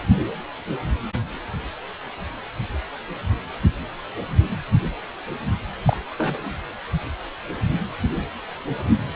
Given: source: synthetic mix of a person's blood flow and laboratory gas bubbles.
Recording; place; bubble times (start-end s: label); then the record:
Doppler ultrasound of blood flow; precordium
5.87-5.97 s: bubbles
6.18-6.62 s: bubbles
From the record:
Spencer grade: 1 (occasional bubble signal discernible with the cardiac motion signal, with majority of cardiac periods free of bubbles); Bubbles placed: anywhere in the cardiac cycle